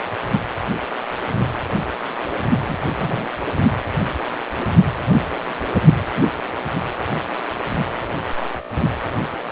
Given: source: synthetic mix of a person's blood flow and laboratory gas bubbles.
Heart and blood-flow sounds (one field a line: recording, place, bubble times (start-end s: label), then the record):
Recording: Doppler ultrasound of blood flow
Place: precordium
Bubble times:
2.59-2.76 s: bubbles
2.98-3.29 s: bubbles
5.86-5.94 s: bubbles
From the record:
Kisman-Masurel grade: 122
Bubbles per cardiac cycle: 1 to 2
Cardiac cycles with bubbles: 10 to 50%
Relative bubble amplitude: moderate (0.250 to 0.450)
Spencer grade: 2 (many but less than half of the cardiac periods contain bubble signals, singularly or in groups)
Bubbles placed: anywhere in the cardiac cycle